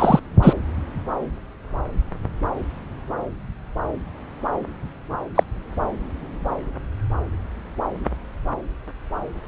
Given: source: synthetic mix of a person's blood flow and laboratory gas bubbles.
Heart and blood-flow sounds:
Doppler ultrasound of blood flow; subclavian vein
0.00-0.20 s: bubbles
0.42-0.55 s: bubbles
5.34-5.43 s: bubbles
From the record:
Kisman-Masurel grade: 123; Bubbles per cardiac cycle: 1 to 2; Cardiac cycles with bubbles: 10 to 50%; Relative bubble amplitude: loud (0.450 to 0.775); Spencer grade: 2 (many but less than half of the cardiac periods contain bubble signals, singularly or in groups); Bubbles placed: anywhere in the cardiac cycle

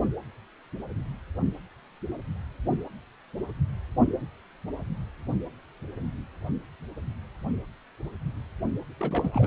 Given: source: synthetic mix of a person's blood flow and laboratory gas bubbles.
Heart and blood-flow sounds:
Doppler ultrasound of blood flow; precordium
8.97-9.47 s: bubbles
From the record:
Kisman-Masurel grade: 211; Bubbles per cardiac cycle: several, 3 to 8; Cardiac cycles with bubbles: 1 to 10%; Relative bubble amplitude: barely perceptible (0.100 to 0.250); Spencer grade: 1 (occasional bubble signal discernible with the cardiac motion signal, with majority of cardiac periods free of bubbles); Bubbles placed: only in the low amplitude regions of the cardiac cycle

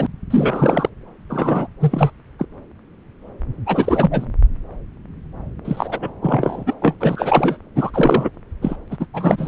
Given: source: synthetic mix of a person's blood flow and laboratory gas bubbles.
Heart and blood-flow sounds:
Doppler ultrasound of blood flow; subclavian vein
0.00-0.07 s: bubbles
0.30-0.90 s: bubbles
1.29-1.67 s: bubbles
1.80-2.10 s: bubbles
2.38-2.46 s: bubbles
3.66-4.25 s: bubbles
5.64-5.99 s: bubbles
6.01-6.10 s: bubbles
6.21-6.75 s: bubbles
6.81-6.96 s: bubbles
7.00-7.58 s: bubbles
7.75-7.90 s: bubbles
7.93-8.29 s: bubbles
8.62-8.76 s: bubbles
8.88-8.97 s: bubbles
8.99-9.06 s: bubbles
9.13-9.48 s: bubbles
From the record:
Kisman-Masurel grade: 333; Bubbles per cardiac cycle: rolling drumbeat, 9 or more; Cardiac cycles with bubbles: 50 to 99%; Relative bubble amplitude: loud (0.450 to 0.775); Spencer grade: 3 (all of the cardiac periods contain showers or single bubble signals, but not dominating or overriding the cardiac motion signals); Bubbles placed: anywhere in the cardiac cycle

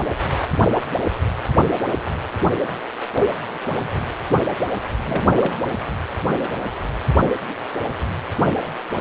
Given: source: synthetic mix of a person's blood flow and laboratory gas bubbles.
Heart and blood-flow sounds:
Doppler ultrasound of blood flow; precordium
5.00-5.56 s: bubbles
From the record:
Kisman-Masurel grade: 211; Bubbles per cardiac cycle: several, 3 to 8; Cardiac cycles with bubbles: 1 to 10%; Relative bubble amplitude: barely perceptible (0.100 to 0.250); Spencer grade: 1 (occasional bubble signal discernible with the cardiac motion signal, with majority of cardiac periods free of bubbles); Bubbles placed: anywhere in the cardiac cycle

